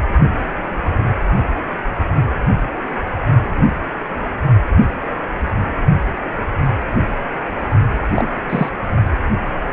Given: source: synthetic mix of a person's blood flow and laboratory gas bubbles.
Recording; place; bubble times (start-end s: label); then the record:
Doppler ultrasound of blood flow; precordium
8.15-8.29 s: bubbles
8.49-8.70 s: bubbles
From the record:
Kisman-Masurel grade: 113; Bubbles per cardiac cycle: 1 to 2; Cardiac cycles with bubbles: 1 to 10%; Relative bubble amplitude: loud (0.450 to 0.775); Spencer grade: 1 (occasional bubble signal discernible with the cardiac motion signal, with majority of cardiac periods free of bubbles); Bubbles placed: only in the low amplitude regions of the cardiac cycle